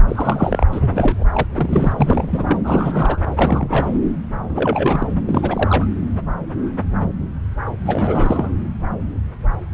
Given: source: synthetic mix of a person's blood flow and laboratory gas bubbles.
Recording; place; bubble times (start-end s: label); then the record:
Doppler ultrasound of blood flow; subclavian vein
0.08-0.66 s: bubbles
0.71-1.24 s: bubbles
1.34-1.46 s: bubbles
1.52-1.93 s: bubbles
1.98-2.58 s: bubbles
2.64-3.22 s: bubbles
3.35-3.96 s: bubbles
4.49-5.07 s: bubbles
5.28-5.87 s: bubbles
7.85-8.49 s: bubbles
From the record:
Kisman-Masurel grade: 332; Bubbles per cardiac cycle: rolling drumbeat, 9 or more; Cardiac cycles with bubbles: 50 to 99%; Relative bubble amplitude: moderate (0.250 to 0.450); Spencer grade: 3 (all of the cardiac periods contain showers or single bubble signals, but not dominating or overriding the cardiac motion signals); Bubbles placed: anywhere in the cardiac cycle